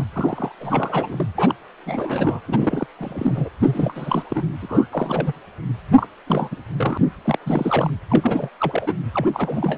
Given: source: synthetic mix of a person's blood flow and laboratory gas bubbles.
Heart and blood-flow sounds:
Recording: Doppler ultrasound of blood flow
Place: precordium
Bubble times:
0.00-0.05 s: bubbles
0.13-0.52 s: bubbles
0.60-1.26 s: bubbles
1.34-1.54 s: bubbles
1.86-2.40 s: bubbles
2.45-2.87 s: bubbles
2.98-3.49 s: bubbles
3.59-4.23 s: bubbles
4.29-4.44 s: bubbles
4.62-4.86 s: bubbles
4.92-5.33 s: bubbles
5.96-6.07 s: bubbles
6.27-6.49 s: bubbles
6.51-6.56 s: bubbles
6.77-6.98 s: bubbles
7.24-7.38 s: bubbles
7.46-7.90 s: bubbles
8.10-8.48 s: bubbles
8.60-8.93 s: bubbles
9.13-9.27 s: bubbles
9.33-9.78 s: bubbles
From the record:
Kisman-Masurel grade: 342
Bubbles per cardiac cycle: rolling drumbeat, 9 or more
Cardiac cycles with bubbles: 100%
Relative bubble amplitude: moderate (0.250 to 0.450)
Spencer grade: 3 (all of the cardiac periods contain showers or single bubble signals, but not dominating or overriding the cardiac motion signals)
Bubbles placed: anywhere in the cardiac cycle

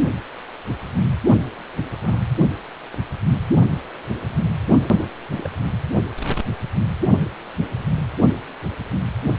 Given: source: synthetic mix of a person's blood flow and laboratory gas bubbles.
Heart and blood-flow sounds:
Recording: Doppler ultrasound of blood flow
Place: precordium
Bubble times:
2.02-2.21 s: bubbles
5.37-5.50 s: bubbles
From the record:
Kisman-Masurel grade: 121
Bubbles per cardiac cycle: 1 to 2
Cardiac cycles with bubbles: 10 to 50%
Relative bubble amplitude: barely perceptible (0.100 to 0.250)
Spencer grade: 2 (many but less than half of the cardiac periods contain bubble signals, singularly or in groups)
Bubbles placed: only in the low amplitude regions of the cardiac cycle

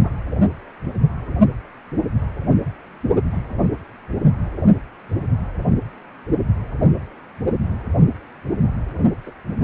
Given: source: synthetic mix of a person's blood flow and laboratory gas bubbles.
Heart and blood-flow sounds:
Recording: Doppler ultrasound of blood flow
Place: precordium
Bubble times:
0.03-0.13 s: bubbles
3.32-3.44 s: bubbles
9.25-9.31 s: bubbles
From the record:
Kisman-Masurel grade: 121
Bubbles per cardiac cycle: 1 to 2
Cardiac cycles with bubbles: 10 to 50%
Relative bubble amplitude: barely perceptible (0.100 to 0.250)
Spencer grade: 2 (many but less than half of the cardiac periods contain bubble signals, singularly or in groups)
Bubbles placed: anywhere in the cardiac cycle

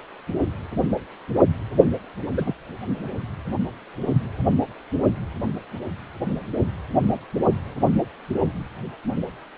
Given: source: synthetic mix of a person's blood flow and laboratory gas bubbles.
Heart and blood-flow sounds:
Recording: Doppler ultrasound of blood flow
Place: precordium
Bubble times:
2.35-2.53 s: bubbles
From the record:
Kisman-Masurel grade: 112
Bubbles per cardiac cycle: 1 to 2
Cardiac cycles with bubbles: 1 to 10%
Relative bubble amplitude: moderate (0.250 to 0.450)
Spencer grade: 1 (occasional bubble signal discernible with the cardiac motion signal, with majority of cardiac periods free of bubbles)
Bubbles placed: only in the low amplitude regions of the cardiac cycle

